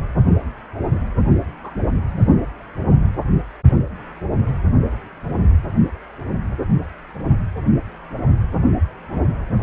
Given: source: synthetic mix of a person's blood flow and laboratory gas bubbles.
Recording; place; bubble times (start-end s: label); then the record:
Doppler ultrasound of blood flow; precordium
1.64-1.72 s: bubbles
2.08-2.27 s: bubbles
From the record:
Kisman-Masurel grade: 111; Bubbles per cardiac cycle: 1 to 2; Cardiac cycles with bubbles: 1 to 10%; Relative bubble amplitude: barely perceptible (0.100 to 0.250); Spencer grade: 1 (occasional bubble signal discernible with the cardiac motion signal, with majority of cardiac periods free of bubbles); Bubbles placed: only in the low amplitude regions of the cardiac cycle